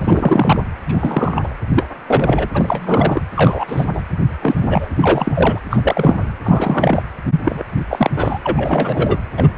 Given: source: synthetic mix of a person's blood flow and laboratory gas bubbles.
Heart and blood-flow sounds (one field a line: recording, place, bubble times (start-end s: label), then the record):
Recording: Doppler ultrasound of blood flow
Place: precordium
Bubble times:
0.00-0.62 s: bubbles
0.87-1.53 s: bubbles
1.74-1.86 s: bubbles
2.07-2.49 s: bubbles
2.53-3.22 s: bubbles
3.35-3.85 s: bubbles
3.93-4.01 s: bubbles
4.42-4.88 s: bubbles
4.96-5.58 s: bubbles
5.70-6.19 s: bubbles
6.43-7.02 s: bubbles
7.44-7.63 s: bubbles
7.88-8.10 s: bubbles
8.16-8.38 s: bubbles
8.44-9.17 s: bubbles
9.37-9.49 s: bubbles
From the record:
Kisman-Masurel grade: 233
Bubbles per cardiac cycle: several, 3 to 8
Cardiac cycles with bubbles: 50 to 99%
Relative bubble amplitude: loud (0.450 to 0.775)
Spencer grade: 3 (all of the cardiac periods contain showers or single bubble signals, but not dominating or overriding the cardiac motion signals)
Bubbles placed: anywhere in the cardiac cycle